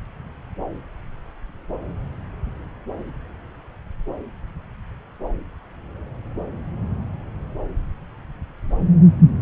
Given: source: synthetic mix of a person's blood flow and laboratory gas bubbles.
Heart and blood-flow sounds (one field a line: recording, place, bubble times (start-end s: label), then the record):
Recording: Doppler ultrasound of blood flow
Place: subclavian vein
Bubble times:
no bubbles
From the record:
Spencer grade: 0 (complete lack of bubble signals)